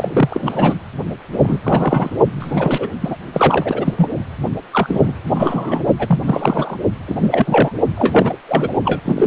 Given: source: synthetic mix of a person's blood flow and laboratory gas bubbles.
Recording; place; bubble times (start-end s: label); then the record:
Doppler ultrasound of blood flow; precordium
0.00-0.74 s: bubbles
1.33-1.60 s: bubbles
1.64-2.16 s: bubbles
2.35-2.92 s: bubbles
3.01-3.17 s: bubbles
3.33-3.93 s: bubbles
3.96-4.09 s: bubbles
4.71-5.13 s: bubbles
5.27-5.83 s: bubbles
5.98-6.76 s: bubbles
7.07-7.72 s: bubbles
7.96-8.37 s: bubbles
8.48-8.72 s: bubbles
8.84-9.01 s: bubbles
9.05-9.27 s: bubbles
From the record:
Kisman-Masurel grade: 343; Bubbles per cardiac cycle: rolling drumbeat, 9 or more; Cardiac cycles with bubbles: 100%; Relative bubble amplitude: loud (0.450 to 0.775); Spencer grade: 3 (all of the cardiac periods contain showers or single bubble signals, but not dominating or overriding the cardiac motion signals); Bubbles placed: only in the low amplitude regions of the cardiac cycle